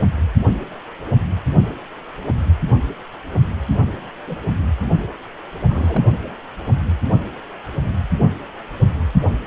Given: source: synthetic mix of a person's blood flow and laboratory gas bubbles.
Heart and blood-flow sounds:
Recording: Doppler ultrasound of blood flow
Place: precordium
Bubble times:
4.27-4.38 s: bubbles
5.69-6.03 s: bubbles
From the record:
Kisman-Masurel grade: 121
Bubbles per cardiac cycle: 1 to 2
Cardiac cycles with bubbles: 10 to 50%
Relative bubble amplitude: barely perceptible (0.100 to 0.250)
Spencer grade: 2 (many but less than half of the cardiac periods contain bubble signals, singularly or in groups)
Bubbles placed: only in the low amplitude regions of the cardiac cycle

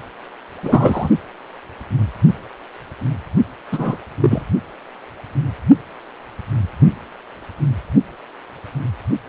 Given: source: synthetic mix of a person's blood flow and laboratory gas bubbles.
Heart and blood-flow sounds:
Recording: Doppler ultrasound of blood flow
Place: precordium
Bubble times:
0.61-1.09 s: bubbles
3.72-3.98 s: bubbles
4.21-4.43 s: bubbles
From the record:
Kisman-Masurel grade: 223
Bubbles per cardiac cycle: several, 3 to 8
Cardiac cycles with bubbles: 10 to 50%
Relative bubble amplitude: loud (0.450 to 0.775)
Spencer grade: 2 (many but less than half of the cardiac periods contain bubble signals, singularly or in groups)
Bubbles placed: only in the low amplitude regions of the cardiac cycle

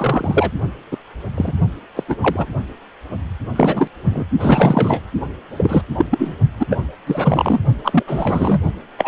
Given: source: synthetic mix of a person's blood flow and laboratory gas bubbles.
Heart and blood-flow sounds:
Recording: Doppler ultrasound of blood flow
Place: precordium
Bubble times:
0.00-0.52 s: bubbles
0.91-0.98 s: bubbles
1.36-1.52 s: bubbles
1.95-2.04 s: bubbles
2.08-2.15 s: bubbles
2.21-2.46 s: bubbles
3.56-3.88 s: bubbles
4.04-4.24 s: bubbles
4.39-5.01 s: bubbles
5.57-5.81 s: bubbles
5.97-6.05 s: bubbles
6.10-6.35 s: bubbles
6.59-6.66 s: bubbles
6.70-6.79 s: bubbles
7.06-7.59 s: bubbles
7.84-8.03 s: bubbles
8.07-8.59 s: bubbles
8.98-9.08 s: bubbles
From the record:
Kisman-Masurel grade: 243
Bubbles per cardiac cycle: several, 3 to 8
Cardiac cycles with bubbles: 100%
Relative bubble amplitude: loud (0.450 to 0.775)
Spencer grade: 3 (all of the cardiac periods contain showers or single bubble signals, but not dominating or overriding the cardiac motion signals)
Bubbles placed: only in the low amplitude regions of the cardiac cycle

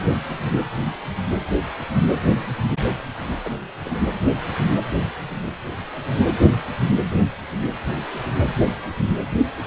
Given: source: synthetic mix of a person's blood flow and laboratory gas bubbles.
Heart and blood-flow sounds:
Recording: Doppler ultrasound of blood flow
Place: precordium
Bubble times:
3.44-3.50 s: bubbles
3.85-3.98 s: bubbles
From the record:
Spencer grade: 1 (occasional bubble signal discernible with the cardiac motion signal, with majority of cardiac periods free of bubbles)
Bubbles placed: anywhere in the cardiac cycle

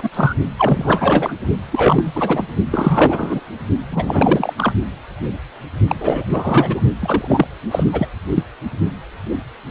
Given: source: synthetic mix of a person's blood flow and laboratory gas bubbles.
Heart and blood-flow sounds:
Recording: Doppler ultrasound of blood flow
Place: precordium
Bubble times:
0.00-0.34 s: bubbles
0.58-1.33 s: bubbles
1.71-2.12 s: bubbles
2.15-2.44 s: bubbles
2.71-3.40 s: bubbles
3.90-4.53 s: bubbles
4.57-4.73 s: bubbles
5.88-5.96 s: bubbles
6.00-6.26 s: bubbles
6.29-6.81 s: bubbles
7.02-7.48 s: bubbles
7.71-7.83 s: bubbles
7.92-8.07 s: bubbles
8.29-8.43 s: bubbles
From the record:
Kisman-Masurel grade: 333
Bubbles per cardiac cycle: rolling drumbeat, 9 or more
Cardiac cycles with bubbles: 50 to 99%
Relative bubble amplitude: loud (0.450 to 0.775)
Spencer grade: 3 (all of the cardiac periods contain showers or single bubble signals, but not dominating or overriding the cardiac motion signals)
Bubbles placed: only in the low amplitude regions of the cardiac cycle

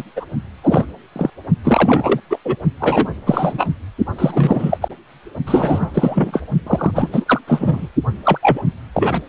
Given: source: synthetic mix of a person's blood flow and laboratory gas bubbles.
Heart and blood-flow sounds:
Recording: Doppler ultrasound of blood flow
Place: precordium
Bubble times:
0.00-0.03 s: bubbles
0.16-0.26 s: bubbles
0.63-0.93 s: bubbles
1.16-1.30 s: bubbles
1.64-2.20 s: bubbles
2.30-2.38 s: bubbles
2.44-2.56 s: bubbles
2.79-3.08 s: bubbles
3.26-3.68 s: bubbles
4.19-4.78 s: bubbles
4.81-4.88 s: bubbles
5.46-5.90 s: bubbles
5.94-6.40 s: bubbles
6.66-6.91 s: bubbles
6.95-7.10 s: bubbles
7.12-7.40 s: bubbles
7.47-7.88 s: bubbles
8.24-8.38 s: bubbles
8.42-8.62 s: bubbles
8.93-9.21 s: bubbles
From the record:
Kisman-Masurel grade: 343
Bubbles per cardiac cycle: rolling drumbeat, 9 or more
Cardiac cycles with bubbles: 100%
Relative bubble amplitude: loud (0.450 to 0.775)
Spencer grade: 3 (all of the cardiac periods contain showers or single bubble signals, but not dominating or overriding the cardiac motion signals)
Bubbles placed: only in the low amplitude regions of the cardiac cycle

